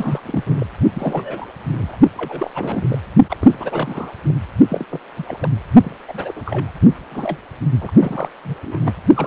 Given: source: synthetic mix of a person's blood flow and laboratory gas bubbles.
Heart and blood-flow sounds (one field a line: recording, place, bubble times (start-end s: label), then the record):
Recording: Doppler ultrasound of blood flow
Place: precordium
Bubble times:
0.00-0.21 s: bubbles
0.24-0.66 s: bubbles
0.93-1.47 s: bubbles
1.73-1.96 s: bubbles
2.16-2.50 s: bubbles
2.54-2.99 s: bubbles
3.29-3.37 s: bubbles
3.40-4.10 s: bubbles
4.27-4.34 s: bubbles
4.70-4.85 s: bubbles
4.91-5.00 s: bubbles
5.17-5.50 s: bubbles
5.83-5.96 s: bubbles
6.08-6.42 s: bubbles
6.45-6.71 s: bubbles
7.12-7.38 s: bubbles
7.81-7.92 s: bubbles
7.96-8.28 s: bubbles
8.44-8.54 s: bubbles
8.62-8.92 s: bubbles
9.16-9.27 s: bubbles
From the record:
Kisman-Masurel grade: 342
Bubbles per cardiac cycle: rolling drumbeat, 9 or more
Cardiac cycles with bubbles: 100%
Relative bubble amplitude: moderate (0.250 to 0.450)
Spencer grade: 3 (all of the cardiac periods contain showers or single bubble signals, but not dominating or overriding the cardiac motion signals)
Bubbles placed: only in the low amplitude regions of the cardiac cycle